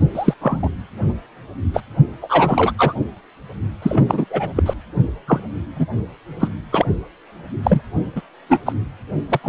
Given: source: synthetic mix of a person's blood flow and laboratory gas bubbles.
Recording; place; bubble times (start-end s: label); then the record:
Doppler ultrasound of blood flow; precordium
0.15-0.34 s: bubbles
0.41-0.68 s: bubbles
1.73-1.80 s: bubbles
2.21-2.72 s: bubbles
2.78-2.93 s: bubbles
3.82-4.25 s: bubbles
4.30-4.50 s: bubbles
4.55-4.63 s: bubbles
4.65-4.73 s: bubbles
5.27-5.40 s: bubbles
5.75-5.86 s: bubbles
6.39-6.48 s: bubbles
6.72-6.86 s: bubbles
7.63-7.81 s: bubbles
8.16-8.22 s: bubbles
8.49-8.60 s: bubbles
8.66-8.73 s: bubbles
9.29-9.40 s: bubbles
9.43-9.49 s: bubbles
From the record:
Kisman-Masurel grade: 243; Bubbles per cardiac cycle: several, 3 to 8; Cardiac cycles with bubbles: 100%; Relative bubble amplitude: loud (0.450 to 0.775); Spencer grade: 3 (all of the cardiac periods contain showers or single bubble signals, but not dominating or overriding the cardiac motion signals); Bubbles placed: only in the low amplitude regions of the cardiac cycle